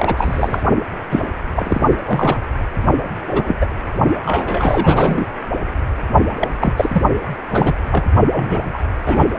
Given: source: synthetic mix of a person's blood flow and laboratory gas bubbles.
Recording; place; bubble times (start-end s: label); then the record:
Doppler ultrasound of blood flow; precordium
0.00-0.63 s: bubbles
1.10-1.21 s: bubbles
1.55-1.91 s: bubbles
2.05-2.38 s: bubbles
3.26-3.56 s: bubbles
3.60-3.67 s: bubbles
4.25-5.26 s: bubbles
6.40-6.50 s: bubbles
6.59-6.73 s: bubbles
6.76-7.02 s: bubbles
7.50-7.74 s: bubbles
7.91-8.04 s: bubbles
8.33-8.79 s: bubbles
9.06-9.27 s: bubbles
From the record:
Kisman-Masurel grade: 243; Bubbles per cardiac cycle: several, 3 to 8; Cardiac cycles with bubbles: 100%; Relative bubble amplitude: loud (0.450 to 0.775); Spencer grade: 3 (all of the cardiac periods contain showers or single bubble signals, but not dominating or overriding the cardiac motion signals); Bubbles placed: only in the low amplitude regions of the cardiac cycle